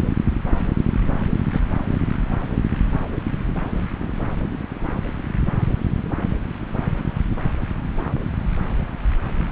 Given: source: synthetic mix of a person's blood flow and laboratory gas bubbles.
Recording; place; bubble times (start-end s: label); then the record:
Doppler ultrasound of blood flow; subclavian vein
1.53-1.60 s: bubbles
From the record:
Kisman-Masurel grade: 113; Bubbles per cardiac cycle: 1 to 2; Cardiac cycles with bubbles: 1 to 10%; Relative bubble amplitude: loud (0.450 to 0.775); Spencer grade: 1 (occasional bubble signal discernible with the cardiac motion signal, with majority of cardiac periods free of bubbles); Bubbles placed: anywhere in the cardiac cycle